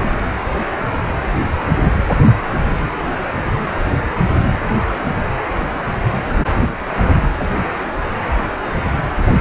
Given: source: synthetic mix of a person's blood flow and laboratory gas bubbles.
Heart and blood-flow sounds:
Doppler ultrasound of blood flow; precordium
7.40-7.49 s: bubbles
From the record:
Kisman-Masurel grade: 113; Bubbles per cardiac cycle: 1 to 2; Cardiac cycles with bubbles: 1 to 10%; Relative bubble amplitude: loud (0.450 to 0.775); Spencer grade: 1 (occasional bubble signal discernible with the cardiac motion signal, with majority of cardiac periods free of bubbles); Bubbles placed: anywhere in the cardiac cycle

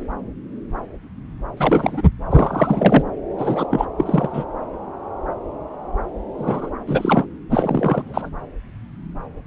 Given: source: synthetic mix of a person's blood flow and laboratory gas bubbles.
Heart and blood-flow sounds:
Doppler ultrasound of blood flow; subclavian vein
1.56-2.03 s: bubbles
2.29-3.03 s: bubbles
3.38-3.66 s: bubbles
3.70-3.85 s: bubbles
3.97-4.44 s: bubbles
6.38-6.70 s: bubbles
6.87-7.25 s: bubbles
7.50-8.29 s: bubbles
From the record:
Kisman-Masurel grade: 333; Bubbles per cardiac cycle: rolling drumbeat, 9 or more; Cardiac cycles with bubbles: 50 to 99%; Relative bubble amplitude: loud (0.450 to 0.775); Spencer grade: 3 (all of the cardiac periods contain showers or single bubble signals, but not dominating or overriding the cardiac motion signals); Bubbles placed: anywhere in the cardiac cycle

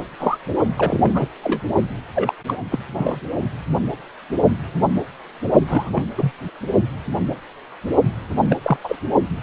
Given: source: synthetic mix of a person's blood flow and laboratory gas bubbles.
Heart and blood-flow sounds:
Doppler ultrasound of blood flow; precordium
0.19-0.36 s: bubbles
0.76-1.27 s: bubbles
1.43-1.61 s: bubbles
2.15-2.35 s: bubbles
2.48-2.67 s: bubbles
2.72-2.79 s: bubbles
2.94-3.18 s: bubbles
5.67-6.03 s: bubbles
6.17-6.31 s: bubbles
8.49-8.57 s: bubbles
8.62-8.77 s: bubbles
8.84-8.96 s: bubbles
From the record:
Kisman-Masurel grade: 232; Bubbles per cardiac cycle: several, 3 to 8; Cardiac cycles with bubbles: 50 to 99%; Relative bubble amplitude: moderate (0.250 to 0.450); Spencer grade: 3 (all of the cardiac periods contain showers or single bubble signals, but not dominating or overriding the cardiac motion signals); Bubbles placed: only in the low amplitude regions of the cardiac cycle

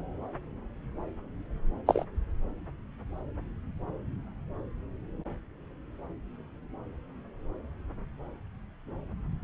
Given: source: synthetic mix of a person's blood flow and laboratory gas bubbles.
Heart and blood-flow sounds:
Doppler ultrasound of blood flow; subclavian vein
1.86-2.05 s: bubbles
From the record:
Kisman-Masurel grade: 113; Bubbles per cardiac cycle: 1 to 2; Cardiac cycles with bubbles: 1 to 10%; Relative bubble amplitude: loud (0.450 to 0.775); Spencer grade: 1 (occasional bubble signal discernible with the cardiac motion signal, with majority of cardiac periods free of bubbles); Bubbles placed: anywhere in the cardiac cycle

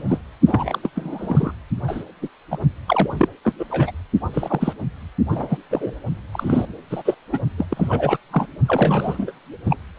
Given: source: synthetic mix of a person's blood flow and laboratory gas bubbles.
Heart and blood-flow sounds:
Doppler ultrasound of blood flow; precordium
0.00-0.18 s: bubbles
0.46-0.79 s: bubbles
0.83-0.90 s: bubbles
0.95-1.52 s: bubbles
1.88-2.04 s: bubbles
2.22-2.28 s: bubbles
2.51-2.58 s: bubbles
2.87-3.29 s: bubbles
3.45-3.53 s: bubbles
3.59-3.65 s: bubbles
3.69-3.91 s: bubbles
4.33-4.73 s: bubbles
5.29-5.58 s: bubbles
5.71-5.94 s: bubbles
6.32-6.66 s: bubbles
6.90-7.03 s: bubbles
7.05-7.15 s: bubbles
7.32-7.40 s: bubbles
7.58-7.66 s: bubbles
7.70-8.18 s: bubbles
8.31-8.46 s: bubbles
8.68-9.31 s: bubbles
9.66-9.77 s: bubbles
From the record:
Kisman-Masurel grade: 342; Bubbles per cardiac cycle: rolling drumbeat, 9 or more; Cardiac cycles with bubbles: 100%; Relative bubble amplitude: moderate (0.250 to 0.450); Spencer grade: 3 (all of the cardiac periods contain showers or single bubble signals, but not dominating or overriding the cardiac motion signals); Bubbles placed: only in the low amplitude regions of the cardiac cycle

